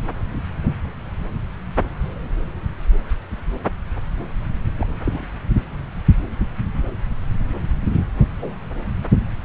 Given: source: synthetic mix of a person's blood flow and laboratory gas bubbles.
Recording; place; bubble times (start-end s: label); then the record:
Doppler ultrasound of blood flow; subclavian vein
4.78-4.87 s: bubbles
5.07-5.24 s: bubbles
8.39-8.55 s: bubbles
From the record:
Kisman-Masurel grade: 121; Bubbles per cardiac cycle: 1 to 2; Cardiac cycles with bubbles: 10 to 50%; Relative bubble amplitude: barely perceptible (0.100 to 0.250); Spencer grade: 2 (many but less than half of the cardiac periods contain bubble signals, singularly or in groups); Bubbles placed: anywhere in the cardiac cycle